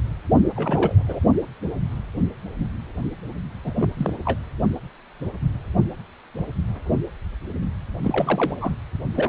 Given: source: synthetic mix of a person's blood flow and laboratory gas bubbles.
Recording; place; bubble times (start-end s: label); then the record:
Doppler ultrasound of blood flow; precordium
0.56-1.20 s: bubbles
3.64-3.91 s: bubbles
3.97-4.13 s: bubbles
4.25-4.38 s: bubbles
8.03-8.75 s: bubbles
9.15-9.29 s: bubbles
From the record:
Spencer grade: 3 (all of the cardiac periods contain showers or single bubble signals, but not dominating or overriding the cardiac motion signals); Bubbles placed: only in the low amplitude regions of the cardiac cycle